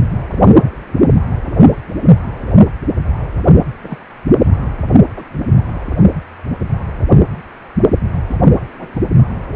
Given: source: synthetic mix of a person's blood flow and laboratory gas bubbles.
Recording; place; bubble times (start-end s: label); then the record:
Doppler ultrasound of blood flow; precordium
0.32-0.38 s: bubbles
0.61-0.70 s: bubbles
3.82-3.98 s: bubbles
5.15-5.23 s: bubbles
8.27-8.38 s: bubbles
8.79-8.88 s: bubbles
8.96-9.01 s: bubbles
From the record:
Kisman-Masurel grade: 121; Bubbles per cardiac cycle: 1 to 2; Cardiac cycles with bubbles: 10 to 50%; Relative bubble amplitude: barely perceptible (0.100 to 0.250); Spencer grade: 2 (many but less than half of the cardiac periods contain bubble signals, singularly or in groups); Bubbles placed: anywhere in the cardiac cycle